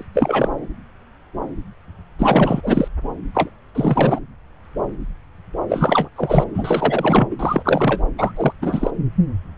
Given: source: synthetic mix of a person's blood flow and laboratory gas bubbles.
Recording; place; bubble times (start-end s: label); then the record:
Doppler ultrasound of blood flow; subclavian vein
0.00-0.04 s: bubbles
0.14-0.48 s: bubbles
2.19-2.88 s: bubbles
3.34-3.50 s: bubbles
3.75-4.20 s: bubbles
5.69-6.08 s: bubbles
6.16-6.45 s: bubbles
6.54-7.28 s: bubbles
7.30-7.36 s: bubbles
7.39-8.02 s: bubbles
8.18-8.32 s: bubbles
8.36-8.53 s: bubbles
8.62-8.91 s: bubbles
From the record:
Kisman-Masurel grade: 333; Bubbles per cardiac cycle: rolling drumbeat, 9 or more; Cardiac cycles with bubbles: 50 to 99%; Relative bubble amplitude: loud (0.450 to 0.775); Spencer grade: 3 (all of the cardiac periods contain showers or single bubble signals, but not dominating or overriding the cardiac motion signals); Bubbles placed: anywhere in the cardiac cycle